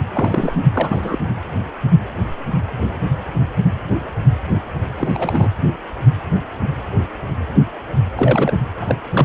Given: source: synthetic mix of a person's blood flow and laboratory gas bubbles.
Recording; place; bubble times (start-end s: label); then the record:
Doppler ultrasound of blood flow; precordium
0.12-0.64 s: bubbles
0.73-1.19 s: bubbles
4.96-5.51 s: bubbles
8.16-8.57 s: bubbles
8.80-8.96 s: bubbles
9.12-9.25 s: bubbles
From the record:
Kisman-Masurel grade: 222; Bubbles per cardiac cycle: several, 3 to 8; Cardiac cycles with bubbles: 10 to 50%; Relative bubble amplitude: moderate (0.250 to 0.450); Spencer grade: 2 (many but less than half of the cardiac periods contain bubble signals, singularly or in groups); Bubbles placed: anywhere in the cardiac cycle